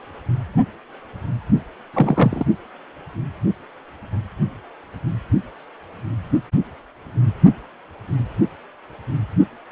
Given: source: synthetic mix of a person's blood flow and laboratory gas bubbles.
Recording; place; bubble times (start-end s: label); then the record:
Doppler ultrasound of blood flow; precordium
1.93-2.45 s: bubbles
From the record:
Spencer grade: 1 (occasional bubble signal discernible with the cardiac motion signal, with majority of cardiac periods free of bubbles); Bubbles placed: only in the low amplitude regions of the cardiac cycle